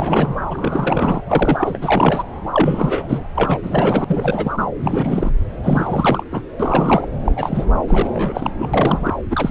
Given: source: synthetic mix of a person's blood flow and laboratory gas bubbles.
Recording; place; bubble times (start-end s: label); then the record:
Doppler ultrasound of blood flow; subclavian vein
0.00-0.35 s: bubbles
0.50-1.22 s: bubbles
1.27-1.79 s: bubbles
1.81-2.29 s: bubbles
2.54-3.19 s: bubbles
3.35-3.58 s: bubbles
3.62-4.04 s: bubbles
4.07-4.64 s: bubbles
4.82-5.31 s: bubbles
5.63-6.23 s: bubbles
6.30-6.43 s: bubbles
6.60-7.09 s: bubbles
7.24-7.32 s: bubbles
7.36-7.65 s: bubbles
7.88-8.51 s: bubbles
8.59-8.69 s: bubbles
8.74-9.13 s: bubbles
9.29-9.51 s: bubbles
From the record:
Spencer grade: 3 (all of the cardiac periods contain showers or single bubble signals, but not dominating or overriding the cardiac motion signals); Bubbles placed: anywhere in the cardiac cycle